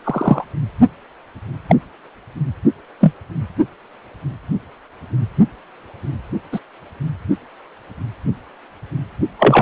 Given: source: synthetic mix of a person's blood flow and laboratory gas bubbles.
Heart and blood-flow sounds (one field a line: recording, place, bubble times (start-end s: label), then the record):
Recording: Doppler ultrasound of blood flow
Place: precordium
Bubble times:
0.04-0.44 s: bubbles
1.68-1.76 s: bubbles
3.01-3.12 s: bubbles
6.52-6.59 s: bubbles
9.39-9.62 s: bubbles
From the record:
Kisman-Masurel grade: 123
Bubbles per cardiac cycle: 1 to 2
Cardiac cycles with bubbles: 10 to 50%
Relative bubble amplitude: loud (0.450 to 0.775)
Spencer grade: 2 (many but less than half of the cardiac periods contain bubble signals, singularly or in groups)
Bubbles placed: only in the low amplitude regions of the cardiac cycle